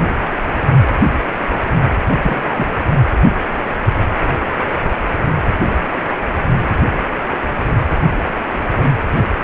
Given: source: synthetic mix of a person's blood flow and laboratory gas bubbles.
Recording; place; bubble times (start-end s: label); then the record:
Doppler ultrasound of blood flow; precordium
2.16-2.66 s: bubbles
From the record:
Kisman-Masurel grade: 113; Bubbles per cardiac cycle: 1 to 2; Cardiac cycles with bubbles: 1 to 10%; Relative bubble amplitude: loud (0.450 to 0.775); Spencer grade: 1 (occasional bubble signal discernible with the cardiac motion signal, with majority of cardiac periods free of bubbles); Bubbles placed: anywhere in the cardiac cycle